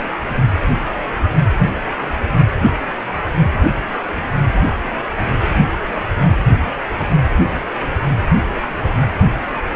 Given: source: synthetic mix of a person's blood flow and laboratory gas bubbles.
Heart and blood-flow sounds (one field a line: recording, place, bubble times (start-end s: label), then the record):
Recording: Doppler ultrasound of blood flow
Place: precordium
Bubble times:
no bubbles
From the record:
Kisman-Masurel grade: 000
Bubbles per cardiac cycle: 0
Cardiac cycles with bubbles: 0%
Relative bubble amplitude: no bubbles discernible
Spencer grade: 0 (complete lack of bubble signals)